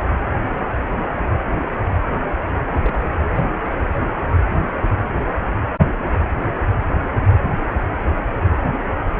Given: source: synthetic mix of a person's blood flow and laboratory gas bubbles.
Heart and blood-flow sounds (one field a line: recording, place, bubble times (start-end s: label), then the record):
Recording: Doppler ultrasound of blood flow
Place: precordium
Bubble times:
2.82-3.07 s: bubbles
3.32-3.43 s: bubbles
From the record:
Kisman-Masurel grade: 121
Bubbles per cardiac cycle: 1 to 2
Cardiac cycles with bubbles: 10 to 50%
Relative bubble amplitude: barely perceptible (0.100 to 0.250)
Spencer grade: 2 (many but less than half of the cardiac periods contain bubble signals, singularly or in groups)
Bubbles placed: anywhere in the cardiac cycle